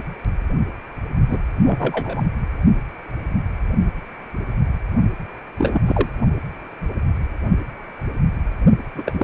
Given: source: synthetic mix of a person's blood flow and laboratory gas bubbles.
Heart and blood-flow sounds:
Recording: Doppler ultrasound of blood flow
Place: precordium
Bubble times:
1.29-1.38 s: bubbles
1.65-2.23 s: bubbles
5.58-5.81 s: bubbles
5.86-6.09 s: bubbles
8.95-9.24 s: bubbles
From the record:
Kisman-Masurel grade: 223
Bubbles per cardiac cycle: several, 3 to 8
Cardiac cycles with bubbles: 10 to 50%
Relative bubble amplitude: loud (0.450 to 0.775)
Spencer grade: 2 (many but less than half of the cardiac periods contain bubble signals, singularly or in groups)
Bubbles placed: only in the low amplitude regions of the cardiac cycle

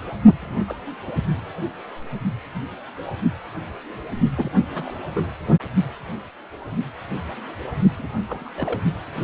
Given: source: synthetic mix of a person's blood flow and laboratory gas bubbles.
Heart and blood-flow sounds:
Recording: Doppler ultrasound of blood flow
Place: precordium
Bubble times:
0.41-0.96 s: bubbles
1.07-1.11 s: bubbles
4.36-4.52 s: bubbles
4.73-4.93 s: bubbles
5.15-5.24 s: bubbles
7.98-8.08 s: bubbles
8.29-8.44 s: bubbles
8.46-8.51 s: bubbles
8.57-8.80 s: bubbles
From the record:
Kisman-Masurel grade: 221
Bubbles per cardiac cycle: several, 3 to 8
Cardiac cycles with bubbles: 10 to 50%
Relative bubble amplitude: barely perceptible (0.100 to 0.250)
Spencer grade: 2 (many but less than half of the cardiac periods contain bubble signals, singularly or in groups)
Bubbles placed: only in the low amplitude regions of the cardiac cycle

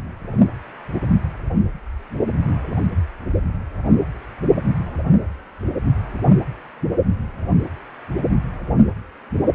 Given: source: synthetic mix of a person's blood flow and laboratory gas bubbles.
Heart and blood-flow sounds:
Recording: Doppler ultrasound of blood flow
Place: precordium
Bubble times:
no bubbles
From the record:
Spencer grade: 0 (complete lack of bubble signals)

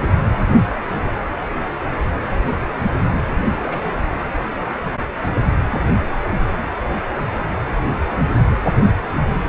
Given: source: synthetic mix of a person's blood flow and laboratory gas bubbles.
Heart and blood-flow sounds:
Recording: Doppler ultrasound of blood flow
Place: precordium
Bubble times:
3.44-4.03 s: bubbles
4.17-4.24 s: bubbles
From the record:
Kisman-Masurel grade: 211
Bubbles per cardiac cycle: several, 3 to 8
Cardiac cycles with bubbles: 1 to 10%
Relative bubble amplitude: barely perceptible (0.100 to 0.250)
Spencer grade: 1 (occasional bubble signal discernible with the cardiac motion signal, with majority of cardiac periods free of bubbles)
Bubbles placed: anywhere in the cardiac cycle

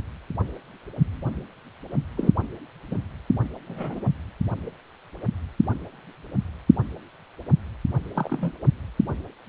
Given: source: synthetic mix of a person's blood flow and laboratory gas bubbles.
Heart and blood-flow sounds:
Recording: Doppler ultrasound of blood flow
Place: precordium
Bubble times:
2.17-2.32 s: bubbles
2.91-2.96 s: bubbles
3.68-4.11 s: bubbles
8.15-8.52 s: bubbles
From the record:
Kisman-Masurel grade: 122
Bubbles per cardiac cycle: 1 to 2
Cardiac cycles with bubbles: 10 to 50%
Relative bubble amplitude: moderate (0.250 to 0.450)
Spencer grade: 2 (many but less than half of the cardiac periods contain bubble signals, singularly or in groups)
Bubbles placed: anywhere in the cardiac cycle

